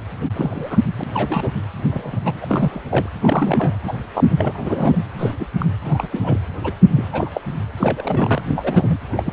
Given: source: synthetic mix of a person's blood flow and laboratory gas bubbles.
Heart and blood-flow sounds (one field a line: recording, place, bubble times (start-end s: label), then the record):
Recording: Doppler ultrasound of blood flow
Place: precordium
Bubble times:
0.36-0.77 s: bubbles
0.97-1.04 s: bubbles
1.14-1.51 s: bubbles
1.91-2.17 s: bubbles
2.25-2.32 s: bubbles
2.41-2.82 s: bubbles
2.90-3.09 s: bubbles
3.20-3.75 s: bubbles
3.84-3.93 s: bubbles
4.14-4.24 s: bubbles
4.29-4.97 s: bubbles
5.18-5.34 s: bubbles
5.39-5.46 s: bubbles
5.58-5.66 s: bubbles
5.82-6.08 s: bubbles
6.12-6.39 s: bubbles
6.63-6.72 s: bubbles
6.92-7.08 s: bubbles
7.12-7.41 s: bubbles
7.77-8.99 s: bubbles
9.12-9.32 s: bubbles
From the record:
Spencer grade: 3 (all of the cardiac periods contain showers or single bubble signals, but not dominating or overriding the cardiac motion signals)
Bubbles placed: anywhere in the cardiac cycle